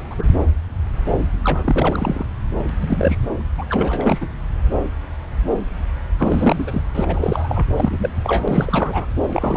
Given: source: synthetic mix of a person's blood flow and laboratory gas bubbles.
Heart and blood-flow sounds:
Doppler ultrasound of blood flow; subclavian vein
0.00-0.02 s: bubbles
0.10-0.15 s: bubbles
0.18-0.28 s: bubbles
1.44-2.25 s: bubbles
2.69-2.72 s: bubbles
2.81-3.17 s: bubbles
3.57-3.65 s: bubbles
3.69-4.27 s: bubbles
6.18-6.82 s: bubbles
6.95-7.66 s: bubbles
7.77-8.10 s: bubbles
8.24-9.06 s: bubbles
9.33-9.57 s: bubbles
From the record:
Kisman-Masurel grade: 332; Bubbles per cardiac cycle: rolling drumbeat, 9 or more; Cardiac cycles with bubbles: 50 to 99%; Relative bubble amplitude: moderate (0.250 to 0.450); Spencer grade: 3 (all of the cardiac periods contain showers or single bubble signals, but not dominating or overriding the cardiac motion signals); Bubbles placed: anywhere in the cardiac cycle

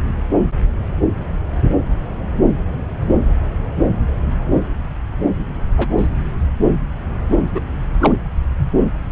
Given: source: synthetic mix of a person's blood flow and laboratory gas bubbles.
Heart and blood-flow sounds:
Doppler ultrasound of blood flow; subclavian vein
5.77-5.88 s: bubbles
5.97-6.08 s: bubbles
7.53-7.61 s: bubbles
8.01-8.12 s: bubbles
From the record:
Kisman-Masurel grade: 123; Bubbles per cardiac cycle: 1 to 2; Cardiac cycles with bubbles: 10 to 50%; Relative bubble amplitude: loud (0.450 to 0.775); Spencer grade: 2 (many but less than half of the cardiac periods contain bubble signals, singularly or in groups); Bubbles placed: anywhere in the cardiac cycle

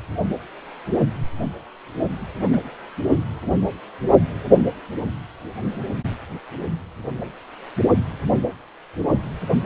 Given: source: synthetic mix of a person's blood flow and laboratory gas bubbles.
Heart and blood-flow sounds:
Doppler ultrasound of blood flow; precordium
2.42-2.47 s: bubbles
2.53-2.56 s: bubbles
From the record:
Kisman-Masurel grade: 111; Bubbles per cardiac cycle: 1 to 2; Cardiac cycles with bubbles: 1 to 10%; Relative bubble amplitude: barely perceptible (0.100 to 0.250); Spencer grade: 1 (occasional bubble signal discernible with the cardiac motion signal, with majority of cardiac periods free of bubbles); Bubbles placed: only in the low amplitude regions of the cardiac cycle

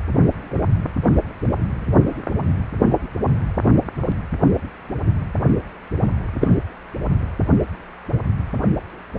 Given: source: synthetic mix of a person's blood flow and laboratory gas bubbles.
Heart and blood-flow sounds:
Doppler ultrasound of blood flow; precordium
6.41-6.54 s: bubbles
From the record:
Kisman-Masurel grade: 113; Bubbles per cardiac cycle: 1 to 2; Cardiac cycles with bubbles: 1 to 10%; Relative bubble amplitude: loud (0.450 to 0.775); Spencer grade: 1 (occasional bubble signal discernible with the cardiac motion signal, with majority of cardiac periods free of bubbles); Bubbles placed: anywhere in the cardiac cycle

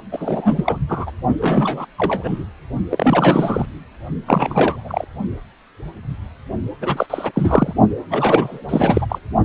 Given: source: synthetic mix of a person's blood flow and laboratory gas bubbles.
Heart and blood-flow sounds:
Doppler ultrasound of blood flow; precordium
0.00-0.02 s: bubbles
0.11-0.78 s: bubbles
0.89-1.11 s: bubbles
1.41-1.86 s: bubbles
1.97-2.43 s: bubbles
2.90-3.66 s: bubbles
4.27-5.04 s: bubbles
6.81-7.06 s: bubbles
7.10-7.74 s: bubbles
8.10-8.62 s: bubbles
8.68-9.06 s: bubbles
9.08-9.19 s: bubbles
From the record:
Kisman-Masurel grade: 333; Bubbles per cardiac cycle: rolling drumbeat, 9 or more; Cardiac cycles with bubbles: 50 to 99%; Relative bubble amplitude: loud (0.450 to 0.775); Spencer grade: 3 (all of the cardiac periods contain showers or single bubble signals, but not dominating or overriding the cardiac motion signals); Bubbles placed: only in the low amplitude regions of the cardiac cycle

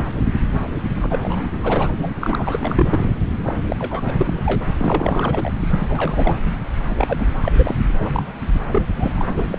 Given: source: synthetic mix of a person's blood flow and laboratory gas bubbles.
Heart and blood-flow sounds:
Doppler ultrasound of blood flow; subclavian vein
0.94-1.49 s: bubbles
1.63-1.92 s: bubbles
1.98-2.14 s: bubbles
2.21-3.10 s: bubbles
3.46-3.56 s: bubbles
3.67-3.76 s: bubbles
3.79-4.14 s: bubbles
4.17-4.62 s: bubbles
4.78-5.50 s: bubbles
5.61-6.37 s: bubbles
6.97-7.30 s: bubbles
7.42-7.75 s: bubbles
7.98-8.23 s: bubbles
8.71-8.83 s: bubbles
8.96-9.30 s: bubbles
9.37-9.45 s: bubbles
9.48-9.58 s: bubbles
From the record:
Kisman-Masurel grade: 332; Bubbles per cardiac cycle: rolling drumbeat, 9 or more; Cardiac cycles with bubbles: 50 to 99%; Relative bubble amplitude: moderate (0.250 to 0.450); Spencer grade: 3 (all of the cardiac periods contain showers or single bubble signals, but not dominating or overriding the cardiac motion signals); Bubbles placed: anywhere in the cardiac cycle

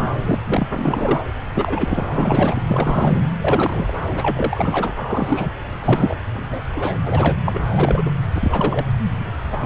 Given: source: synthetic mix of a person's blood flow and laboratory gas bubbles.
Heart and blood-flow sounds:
Doppler ultrasound of blood flow; subclavian vein
0.00-0.08 s: bubbles
0.19-0.39 s: bubbles
0.47-0.67 s: bubbles
0.73-1.23 s: bubbles
1.54-2.05 s: bubbles
2.12-2.62 s: bubbles
2.69-3.21 s: bubbles
3.38-3.93 s: bubbles
4.07-4.95 s: bubbles
5.08-5.51 s: bubbles
5.81-6.17 s: bubbles
6.34-6.62 s: bubbles
6.76-6.98 s: bubbles
7.06-7.37 s: bubbles
7.45-7.64 s: bubbles
7.76-8.03 s: bubbles
8.05-8.12 s: bubbles
8.35-8.86 s: bubbles
9.17-9.33 s: bubbles
9.53-9.57 s: bubbles
9.61-9.66 s: bubbles
From the record:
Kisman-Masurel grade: 242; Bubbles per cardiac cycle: several, 3 to 8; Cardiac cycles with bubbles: 100%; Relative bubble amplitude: moderate (0.250 to 0.450); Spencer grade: 3 (all of the cardiac periods contain showers or single bubble signals, but not dominating or overriding the cardiac motion signals); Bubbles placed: anywhere in the cardiac cycle

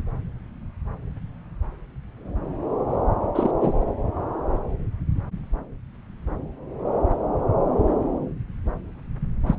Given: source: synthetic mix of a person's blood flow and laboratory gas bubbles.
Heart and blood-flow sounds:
Doppler ultrasound of blood flow; subclavian vein
3.35-3.51 s: bubbles
3.60-3.73 s: bubbles
9.46-9.55 s: bubbles
From the record:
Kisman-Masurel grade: 222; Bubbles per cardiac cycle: several, 3 to 8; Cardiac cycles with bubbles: 10 to 50%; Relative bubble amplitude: moderate (0.250 to 0.450); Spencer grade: 2 (many but less than half of the cardiac periods contain bubble signals, singularly or in groups); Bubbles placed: anywhere in the cardiac cycle

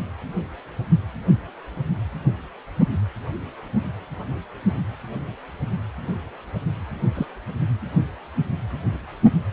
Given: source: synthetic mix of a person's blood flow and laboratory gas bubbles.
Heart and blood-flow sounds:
Doppler ultrasound of blood flow; precordium
7.15-7.27 s: bubbles
From the record:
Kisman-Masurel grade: 122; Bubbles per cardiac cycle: 1 to 2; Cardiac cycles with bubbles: 10 to 50%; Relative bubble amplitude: moderate (0.250 to 0.450); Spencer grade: 2 (many but less than half of the cardiac periods contain bubble signals, singularly or in groups); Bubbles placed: anywhere in the cardiac cycle

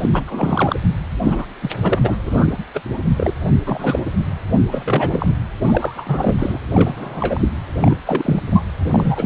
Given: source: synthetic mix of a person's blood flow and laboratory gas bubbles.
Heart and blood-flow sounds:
Doppler ultrasound of blood flow; precordium
0.00-0.09 s: bubbles
0.12-0.23 s: bubbles
0.27-0.76 s: bubbles
1.23-1.46 s: bubbles
1.61-1.71 s: bubbles
1.81-2.17 s: bubbles
2.23-2.65 s: bubbles
2.74-2.81 s: bubbles
3.16-3.33 s: bubbles
3.66-4.02 s: bubbles
4.04-4.10 s: bubbles
4.71-5.35 s: bubbles
5.66-6.60 s: bubbles
6.66-7.48 s: bubbles
7.75-7.95 s: bubbles
8.06-8.42 s: bubbles
8.46-8.62 s: bubbles
8.80-9.26 s: bubbles
From the record:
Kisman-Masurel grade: 343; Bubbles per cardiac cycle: rolling drumbeat, 9 or more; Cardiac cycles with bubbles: 100%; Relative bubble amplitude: loud (0.450 to 0.775); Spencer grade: 3 (all of the cardiac periods contain showers or single bubble signals, but not dominating or overriding the cardiac motion signals); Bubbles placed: anywhere in the cardiac cycle

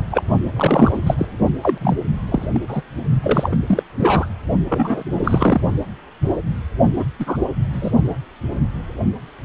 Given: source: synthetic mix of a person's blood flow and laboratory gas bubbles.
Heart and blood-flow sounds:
Doppler ultrasound of blood flow; precordium
0.00-0.03 s: bubbles
0.11-0.23 s: bubbles
0.56-0.99 s: bubbles
1.06-1.15 s: bubbles
1.18-1.26 s: bubbles
1.61-1.78 s: bubbles
1.81-1.96 s: bubbles
2.28-2.48 s: bubbles
2.52-2.61 s: bubbles
2.68-2.81 s: bubbles
3.20-3.56 s: bubbles
3.67-3.83 s: bubbles
3.99-4.27 s: bubbles
4.69-5.04 s: bubbles
5.12-5.61 s: bubbles
6.98-7.06 s: bubbles
7.19-7.37 s: bubbles
7.73-7.92 s: bubbles
From the record:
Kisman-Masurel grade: 233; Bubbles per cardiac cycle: several, 3 to 8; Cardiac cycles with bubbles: 50 to 99%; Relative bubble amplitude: loud (0.450 to 0.775); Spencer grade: 3 (all of the cardiac periods contain showers or single bubble signals, but not dominating or overriding the cardiac motion signals); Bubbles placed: only in the low amplitude regions of the cardiac cycle

